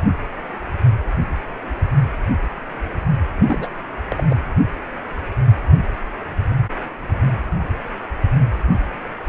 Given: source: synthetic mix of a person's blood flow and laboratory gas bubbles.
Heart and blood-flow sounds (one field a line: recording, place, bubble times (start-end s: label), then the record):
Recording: Doppler ultrasound of blood flow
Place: precordium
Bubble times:
3.46-3.69 s: bubbles
4.09-4.23 s: bubbles
4.29-4.36 s: bubbles
From the record:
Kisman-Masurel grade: 211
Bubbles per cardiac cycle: several, 3 to 8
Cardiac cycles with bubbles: 1 to 10%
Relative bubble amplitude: barely perceptible (0.100 to 0.250)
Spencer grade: 1 (occasional bubble signal discernible with the cardiac motion signal, with majority of cardiac periods free of bubbles)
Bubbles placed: only in the low amplitude regions of the cardiac cycle